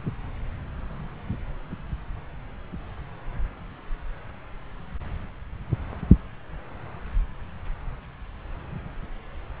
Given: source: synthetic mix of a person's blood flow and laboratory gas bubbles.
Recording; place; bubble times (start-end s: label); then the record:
Doppler ultrasound of blood flow; subclavian vein
no bubbles
From the record:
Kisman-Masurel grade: 000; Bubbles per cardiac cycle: 0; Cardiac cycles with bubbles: 0%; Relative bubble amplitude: no bubbles discernible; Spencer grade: 0 (complete lack of bubble signals)